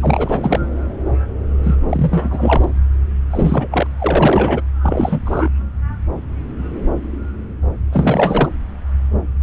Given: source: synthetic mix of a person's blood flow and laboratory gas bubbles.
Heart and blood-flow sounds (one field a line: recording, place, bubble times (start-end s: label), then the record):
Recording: Doppler ultrasound of blood flow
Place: subclavian vein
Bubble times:
0.02-0.59 s: bubbles
1.63-1.75 s: bubbles
1.89-2.65 s: bubbles
3.30-3.67 s: bubbles
3.71-3.87 s: bubbles
3.99-4.62 s: bubbles
4.82-5.20 s: bubbles
5.25-5.49 s: bubbles
7.92-8.49 s: bubbles
From the record:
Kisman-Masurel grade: 333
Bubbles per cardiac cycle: rolling drumbeat, 9 or more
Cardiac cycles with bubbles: 50 to 99%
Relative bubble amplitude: loud (0.450 to 0.775)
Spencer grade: 3 (all of the cardiac periods contain showers or single bubble signals, but not dominating or overriding the cardiac motion signals)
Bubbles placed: anywhere in the cardiac cycle